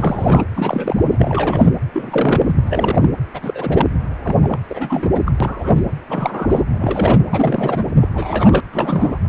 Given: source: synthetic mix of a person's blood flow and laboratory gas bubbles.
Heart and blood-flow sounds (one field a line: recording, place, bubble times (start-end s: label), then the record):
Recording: Doppler ultrasound of blood flow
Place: precordium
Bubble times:
0.00-0.44 s: bubbles
0.54-1.71 s: bubbles
1.93-2.56 s: bubbles
2.67-3.09 s: bubbles
3.33-3.87 s: bubbles
4.23-4.36 s: bubbles
4.42-4.60 s: bubbles
4.69-5.21 s: bubbles
5.25-5.32 s: bubbles
5.40-5.85 s: bubbles
6.08-6.65 s: bubbles
6.69-7.19 s: bubbles
7.30-7.83 s: bubbles
8.00-8.07 s: bubbles
8.14-8.60 s: bubbles
8.72-9.19 s: bubbles
From the record:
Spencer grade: 3 (all of the cardiac periods contain showers or single bubble signals, but not dominating or overriding the cardiac motion signals)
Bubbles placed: anywhere in the cardiac cycle